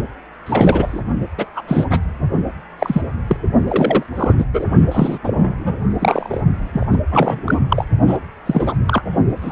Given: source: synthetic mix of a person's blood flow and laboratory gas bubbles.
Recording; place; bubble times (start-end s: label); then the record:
Doppler ultrasound of blood flow; precordium
0.46-1.02 s: bubbles
1.38-1.46 s: bubbles
1.56-1.62 s: bubbles
1.67-1.87 s: bubbles
1.90-2.00 s: bubbles
2.79-3.02 s: bubbles
3.27-3.37 s: bubbles
3.68-4.03 s: bubbles
4.15-4.33 s: bubbles
4.38-4.45 s: bubbles
4.53-4.65 s: bubbles
4.91-5.18 s: bubbles
5.23-5.55 s: bubbles
5.59-5.79 s: bubbles
5.99-6.40 s: bubbles
6.72-6.86 s: bubbles
6.92-6.98 s: bubbles
7.10-7.59 s: bubbles
7.69-7.84 s: bubbles
8.07-8.18 s: bubbles
8.46-8.73 s: bubbles
8.88-9.02 s: bubbles
9.42-9.52 s: bubbles
From the record:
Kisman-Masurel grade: 243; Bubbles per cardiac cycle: several, 3 to 8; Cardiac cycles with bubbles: 100%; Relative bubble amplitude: loud (0.450 to 0.775); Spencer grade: 3 (all of the cardiac periods contain showers or single bubble signals, but not dominating or overriding the cardiac motion signals); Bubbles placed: only in the low amplitude regions of the cardiac cycle